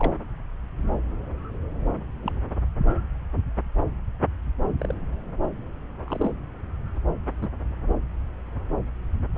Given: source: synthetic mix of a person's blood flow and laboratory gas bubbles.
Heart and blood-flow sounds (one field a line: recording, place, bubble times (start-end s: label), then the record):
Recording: Doppler ultrasound of blood flow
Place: subclavian vein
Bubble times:
0.00-0.15 s: bubbles
2.23-2.32 s: bubbles
4.79-4.94 s: bubbles
6.06-6.29 s: bubbles
7.42-7.48 s: bubbles
From the record:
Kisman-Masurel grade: 121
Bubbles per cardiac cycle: 1 to 2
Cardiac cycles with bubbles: 10 to 50%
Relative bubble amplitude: barely perceptible (0.100 to 0.250)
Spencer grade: 2 (many but less than half of the cardiac periods contain bubble signals, singularly or in groups)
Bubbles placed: anywhere in the cardiac cycle